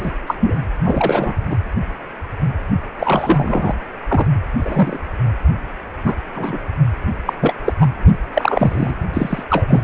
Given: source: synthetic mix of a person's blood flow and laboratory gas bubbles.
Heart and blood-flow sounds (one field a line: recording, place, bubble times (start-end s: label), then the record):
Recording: Doppler ultrasound of blood flow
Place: precordium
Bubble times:
0.00-0.11 s: bubbles
0.26-0.35 s: bubbles
0.40-0.56 s: bubbles
0.84-1.35 s: bubbles
1.50-1.56 s: bubbles
2.99-3.75 s: bubbles
4.08-4.26 s: bubbles
4.57-4.97 s: bubbles
6.04-6.15 s: bubbles
6.34-6.58 s: bubbles
7.26-7.33 s: bubbles
7.41-7.55 s: bubbles
7.64-7.74 s: bubbles
7.79-7.90 s: bubbles
8.34-8.95 s: bubbles
9.13-9.43 s: bubbles
9.49-9.83 s: bubbles
From the record:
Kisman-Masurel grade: 233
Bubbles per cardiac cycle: several, 3 to 8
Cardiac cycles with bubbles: 50 to 99%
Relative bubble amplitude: loud (0.450 to 0.775)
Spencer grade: 3 (all of the cardiac periods contain showers or single bubble signals, but not dominating or overriding the cardiac motion signals)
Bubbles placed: anywhere in the cardiac cycle